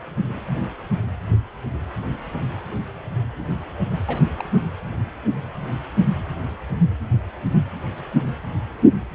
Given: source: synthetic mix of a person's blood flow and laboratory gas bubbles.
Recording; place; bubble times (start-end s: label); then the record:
Doppler ultrasound of blood flow; precordium
4.07-4.22 s: bubbles
4.37-4.45 s: bubbles
From the record:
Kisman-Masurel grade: 211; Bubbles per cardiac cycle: several, 3 to 8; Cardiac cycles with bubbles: 1 to 10%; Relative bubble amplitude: barely perceptible (0.100 to 0.250); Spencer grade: 1 (occasional bubble signal discernible with the cardiac motion signal, with majority of cardiac periods free of bubbles); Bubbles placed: anywhere in the cardiac cycle